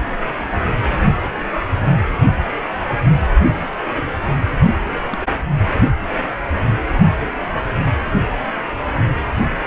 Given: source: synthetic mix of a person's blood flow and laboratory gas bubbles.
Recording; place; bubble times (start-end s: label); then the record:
Doppler ultrasound of blood flow; precordium
5.10-5.26 s: bubbles
From the record:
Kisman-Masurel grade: 111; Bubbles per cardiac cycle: 1 to 2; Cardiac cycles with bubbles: 1 to 10%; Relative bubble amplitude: barely perceptible (0.100 to 0.250); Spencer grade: 1 (occasional bubble signal discernible with the cardiac motion signal, with majority of cardiac periods free of bubbles); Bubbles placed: anywhere in the cardiac cycle